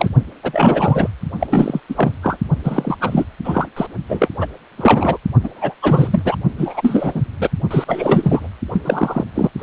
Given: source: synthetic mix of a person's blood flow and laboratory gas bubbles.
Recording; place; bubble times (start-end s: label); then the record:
Doppler ultrasound of blood flow; precordium
0.00-0.09 s: bubbles
0.43-1.08 s: bubbles
1.40-1.47 s: bubbles
1.49-1.80 s: bubbles
1.89-2.15 s: bubbles
2.22-2.38 s: bubbles
2.64-2.96 s: bubbles
3.01-3.25 s: bubbles
3.44-3.67 s: bubbles
3.76-3.87 s: bubbles
4.08-4.29 s: bubbles
4.40-4.46 s: bubbles
4.77-5.17 s: bubbles
5.43-5.49 s: bubbles
5.54-5.74 s: bubbles
5.82-6.36 s: bubbles
6.58-7.24 s: bubbles
7.40-7.50 s: bubbles
7.71-7.84 s: bubbles
7.87-8.48 s: bubbles
8.72-9.24 s: bubbles
9.35-9.49 s: bubbles
9.58-9.62 s: bubbles
From the record:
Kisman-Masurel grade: 333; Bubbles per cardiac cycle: rolling drumbeat, 9 or more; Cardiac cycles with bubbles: 50 to 99%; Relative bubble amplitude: loud (0.450 to 0.775); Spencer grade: 3 (all of the cardiac periods contain showers or single bubble signals, but not dominating or overriding the cardiac motion signals); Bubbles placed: only in the low amplitude regions of the cardiac cycle